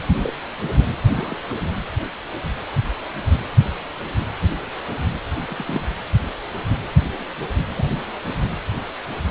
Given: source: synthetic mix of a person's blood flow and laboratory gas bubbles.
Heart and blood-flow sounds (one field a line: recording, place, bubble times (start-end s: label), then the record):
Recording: Doppler ultrasound of blood flow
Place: precordium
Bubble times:
0.23-0.36 s: bubbles
1.12-1.36 s: bubbles
1.49-1.54 s: bubbles
5.37-5.82 s: bubbles
7.76-7.88 s: bubbles
From the record:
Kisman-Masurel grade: 122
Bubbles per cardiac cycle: 1 to 2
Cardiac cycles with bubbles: 10 to 50%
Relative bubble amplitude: moderate (0.250 to 0.450)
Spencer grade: 2 (many but less than half of the cardiac periods contain bubble signals, singularly or in groups)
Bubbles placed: anywhere in the cardiac cycle